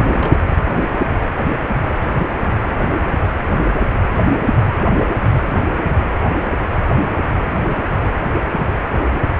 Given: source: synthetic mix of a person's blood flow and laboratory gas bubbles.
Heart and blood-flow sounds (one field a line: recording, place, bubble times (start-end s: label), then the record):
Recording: Doppler ultrasound of blood flow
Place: precordium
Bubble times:
0.00-0.59 s: bubbles
From the record:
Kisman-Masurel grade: 211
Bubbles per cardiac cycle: several, 3 to 8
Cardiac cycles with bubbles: 1 to 10%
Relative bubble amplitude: barely perceptible (0.100 to 0.250)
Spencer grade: 1 (occasional bubble signal discernible with the cardiac motion signal, with majority of cardiac periods free of bubbles)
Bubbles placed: anywhere in the cardiac cycle